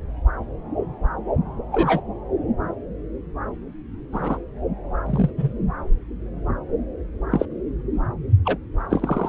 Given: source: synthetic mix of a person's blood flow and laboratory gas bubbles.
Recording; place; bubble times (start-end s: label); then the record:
Doppler ultrasound of blood flow; subclavian vein
1.72-2.00 s: bubbles
4.12-4.38 s: bubbles
5.06-5.30 s: bubbles
5.38-5.53 s: bubbles
7.31-7.46 s: bubbles
8.45-8.57 s: bubbles
8.90-9.29 s: bubbles
From the record:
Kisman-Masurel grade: 122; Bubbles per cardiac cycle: 1 to 2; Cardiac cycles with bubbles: 10 to 50%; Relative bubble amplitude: moderate (0.250 to 0.450); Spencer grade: 2 (many but less than half of the cardiac periods contain bubble signals, singularly or in groups); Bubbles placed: anywhere in the cardiac cycle